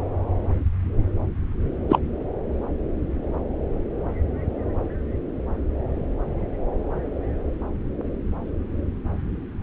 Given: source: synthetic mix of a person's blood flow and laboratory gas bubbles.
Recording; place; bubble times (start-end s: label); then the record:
Doppler ultrasound of blood flow; subclavian vein
1.89-1.98 s: bubbles
From the record:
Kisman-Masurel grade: 113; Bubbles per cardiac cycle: 1 to 2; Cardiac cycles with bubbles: 1 to 10%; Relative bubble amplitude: loud (0.450 to 0.775); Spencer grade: 1 (occasional bubble signal discernible with the cardiac motion signal, with majority of cardiac periods free of bubbles); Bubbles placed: anywhere in the cardiac cycle